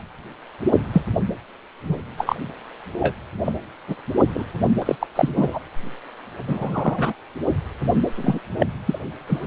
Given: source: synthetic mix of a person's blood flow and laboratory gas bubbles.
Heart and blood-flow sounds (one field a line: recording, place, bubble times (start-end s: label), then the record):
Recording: Doppler ultrasound of blood flow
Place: precordium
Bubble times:
0.93-1.01 s: bubbles
1.84-2.02 s: bubbles
2.18-2.35 s: bubbles
3.00-3.16 s: bubbles
3.45-3.54 s: bubbles
3.88-3.96 s: bubbles
4.34-4.45 s: bubbles
4.82-4.96 s: bubbles
5.00-5.07 s: bubbles
5.16-5.58 s: bubbles
6.48-7.13 s: bubbles
8.15-8.39 s: bubbles
8.59-8.67 s: bubbles
8.86-8.99 s: bubbles
9.28-9.41 s: bubbles
From the record:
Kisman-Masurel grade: 242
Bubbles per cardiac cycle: several, 3 to 8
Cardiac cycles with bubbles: 100%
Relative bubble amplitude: moderate (0.250 to 0.450)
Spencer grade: 3 (all of the cardiac periods contain showers or single bubble signals, but not dominating or overriding the cardiac motion signals)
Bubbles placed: anywhere in the cardiac cycle